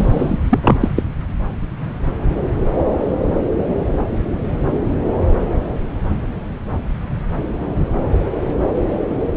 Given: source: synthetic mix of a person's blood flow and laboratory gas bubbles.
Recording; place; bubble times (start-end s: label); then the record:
Doppler ultrasound of blood flow; subclavian vein
0.00-0.37 s: bubbles
0.49-0.59 s: bubbles
0.61-0.89 s: bubbles
0.96-1.02 s: bubbles
From the record:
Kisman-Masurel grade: 223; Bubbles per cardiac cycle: several, 3 to 8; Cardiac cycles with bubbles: 10 to 50%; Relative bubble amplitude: loud (0.450 to 0.775); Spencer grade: 2 (many but less than half of the cardiac periods contain bubble signals, singularly or in groups); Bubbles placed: anywhere in the cardiac cycle